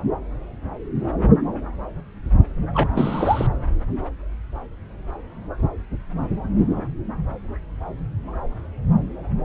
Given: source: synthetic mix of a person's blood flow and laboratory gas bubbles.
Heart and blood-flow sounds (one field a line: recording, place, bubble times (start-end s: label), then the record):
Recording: Doppler ultrasound of blood flow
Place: subclavian vein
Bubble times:
2.73-3.47 s: bubbles
From the record:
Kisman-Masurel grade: 223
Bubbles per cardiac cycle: several, 3 to 8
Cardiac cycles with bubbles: 10 to 50%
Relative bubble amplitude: loud (0.450 to 0.775)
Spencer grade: 2 (many but less than half of the cardiac periods contain bubble signals, singularly or in groups)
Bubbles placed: anywhere in the cardiac cycle